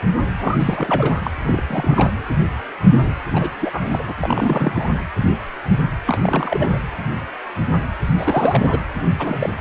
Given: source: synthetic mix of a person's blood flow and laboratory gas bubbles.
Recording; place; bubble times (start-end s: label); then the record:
Doppler ultrasound of blood flow; precordium
0.39-1.31 s: bubbles
1.47-1.62 s: bubbles
1.69-2.11 s: bubbles
3.33-3.50 s: bubbles
3.59-4.04 s: bubbles
4.08-4.13 s: bubbles
4.17-5.02 s: bubbles
6.06-6.17 s: bubbles
6.22-6.78 s: bubbles
8.17-8.79 s: bubbles
9.18-9.53 s: bubbles
From the record:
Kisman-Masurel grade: 332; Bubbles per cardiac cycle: rolling drumbeat, 9 or more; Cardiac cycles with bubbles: 50 to 99%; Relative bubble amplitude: moderate (0.250 to 0.450); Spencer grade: 3 (all of the cardiac periods contain showers or single bubble signals, but not dominating or overriding the cardiac motion signals); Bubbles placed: anywhere in the cardiac cycle